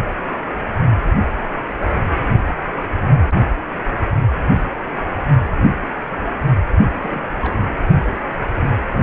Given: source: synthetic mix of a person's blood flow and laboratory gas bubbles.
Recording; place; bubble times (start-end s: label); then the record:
Doppler ultrasound of blood flow; precordium
7.02-7.25 s: bubbles
7.41-7.58 s: bubbles
8.53-8.63 s: bubbles
8.89-8.97 s: bubbles
From the record:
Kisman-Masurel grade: 221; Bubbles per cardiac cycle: several, 3 to 8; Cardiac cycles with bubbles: 10 to 50%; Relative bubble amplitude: barely perceptible (0.100 to 0.250); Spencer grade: 2 (many but less than half of the cardiac periods contain bubble signals, singularly or in groups); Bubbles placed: only in the low amplitude regions of the cardiac cycle